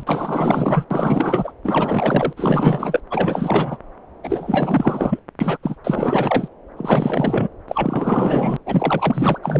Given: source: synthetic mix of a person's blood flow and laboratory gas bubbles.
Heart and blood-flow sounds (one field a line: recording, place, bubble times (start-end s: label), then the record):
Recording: Doppler ultrasound of blood flow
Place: subclavian vein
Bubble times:
0.00-0.03 s: bubbles
0.07-0.85 s: bubbles
0.90-1.52 s: bubbles
1.64-2.33 s: bubbles
2.36-3.00 s: bubbles
3.10-3.78 s: bubbles
4.24-5.19 s: bubbles
5.40-5.58 s: bubbles
5.62-5.76 s: bubbles
5.84-6.48 s: bubbles
6.76-7.48 s: bubbles
7.68-8.56 s: bubbles
8.66-9.38 s: bubbles
9.43-9.60 s: bubbles
From the record:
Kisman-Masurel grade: 444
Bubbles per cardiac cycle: continuous sound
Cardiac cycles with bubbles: 100%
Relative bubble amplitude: maximal (0.775 to 0.999)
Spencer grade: 4 (maximum detectable bubble signal sounding continuously throughout systole and diastole of every cardiac period, and overriding the amplitude of the normal cardiac signals)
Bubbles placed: anywhere in the cardiac cycle